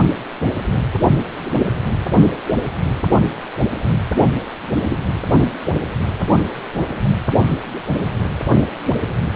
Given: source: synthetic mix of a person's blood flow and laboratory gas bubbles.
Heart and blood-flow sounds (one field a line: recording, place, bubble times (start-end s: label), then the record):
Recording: Doppler ultrasound of blood flow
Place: precordium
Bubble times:
4.83-4.97 s: bubbles
From the record:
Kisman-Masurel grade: 112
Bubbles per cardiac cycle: 1 to 2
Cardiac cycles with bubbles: 1 to 10%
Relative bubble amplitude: moderate (0.250 to 0.450)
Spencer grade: 1 (occasional bubble signal discernible with the cardiac motion signal, with majority of cardiac periods free of bubbles)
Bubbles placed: anywhere in the cardiac cycle